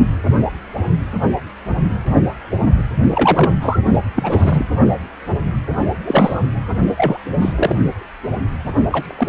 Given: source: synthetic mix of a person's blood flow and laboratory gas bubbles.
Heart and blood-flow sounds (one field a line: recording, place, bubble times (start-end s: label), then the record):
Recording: Doppler ultrasound of blood flow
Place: precordium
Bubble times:
3.15-3.52 s: bubbles
3.62-3.79 s: bubbles
4.16-4.66 s: bubbles
6.04-6.42 s: bubbles
6.97-7.18 s: bubbles
7.41-7.76 s: bubbles
8.90-9.29 s: bubbles
From the record:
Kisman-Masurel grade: 233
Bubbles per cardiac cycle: several, 3 to 8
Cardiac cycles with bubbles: 50 to 99%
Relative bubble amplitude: loud (0.450 to 0.775)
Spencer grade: 3 (all of the cardiac periods contain showers or single bubble signals, but not dominating or overriding the cardiac motion signals)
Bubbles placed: only in the low amplitude regions of the cardiac cycle